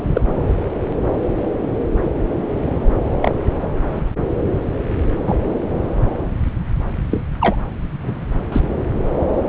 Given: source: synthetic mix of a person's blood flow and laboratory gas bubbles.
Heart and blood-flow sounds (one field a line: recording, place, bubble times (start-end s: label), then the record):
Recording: Doppler ultrasound of blood flow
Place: subclavian vein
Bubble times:
0.14-0.21 s: bubbles
3.21-3.34 s: bubbles
5.26-5.40 s: bubbles
7.11-7.21 s: bubbles
7.40-7.56 s: bubbles
8.03-8.14 s: bubbles
8.52-8.61 s: bubbles
From the record:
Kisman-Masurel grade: 123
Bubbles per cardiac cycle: 1 to 2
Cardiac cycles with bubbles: 10 to 50%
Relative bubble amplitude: loud (0.450 to 0.775)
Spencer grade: 2 (many but less than half of the cardiac periods contain bubble signals, singularly or in groups)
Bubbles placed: anywhere in the cardiac cycle